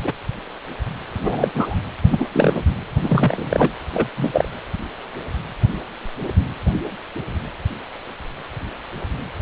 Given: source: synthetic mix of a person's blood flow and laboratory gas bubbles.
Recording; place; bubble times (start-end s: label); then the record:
Doppler ultrasound of blood flow; precordium
0.00-0.13 s: bubbles
1.23-1.51 s: bubbles
1.54-1.76 s: bubbles
2.03-2.60 s: bubbles
3.03-3.70 s: bubbles
3.93-4.09 s: bubbles
4.17-4.49 s: bubbles
From the record:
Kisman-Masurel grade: 223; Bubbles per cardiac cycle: several, 3 to 8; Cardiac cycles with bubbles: 10 to 50%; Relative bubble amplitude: loud (0.450 to 0.775); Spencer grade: 2 (many but less than half of the cardiac periods contain bubble signals, singularly or in groups); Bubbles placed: anywhere in the cardiac cycle